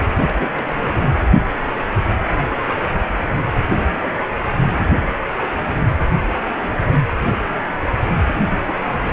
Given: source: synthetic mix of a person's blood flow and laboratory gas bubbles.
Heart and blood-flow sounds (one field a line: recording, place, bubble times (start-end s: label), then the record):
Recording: Doppler ultrasound of blood flow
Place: precordium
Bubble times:
0.23-1.25 s: bubbles
3.71-3.81 s: bubbles
4.02-4.09 s: bubbles
4.18-4.22 s: bubbles
8.67-8.74 s: bubbles
8.86-9.13 s: bubbles
From the record:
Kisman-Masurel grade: 221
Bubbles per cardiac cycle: several, 3 to 8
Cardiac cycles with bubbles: 10 to 50%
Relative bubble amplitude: barely perceptible (0.100 to 0.250)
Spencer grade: 2 (many but less than half of the cardiac periods contain bubble signals, singularly or in groups)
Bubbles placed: anywhere in the cardiac cycle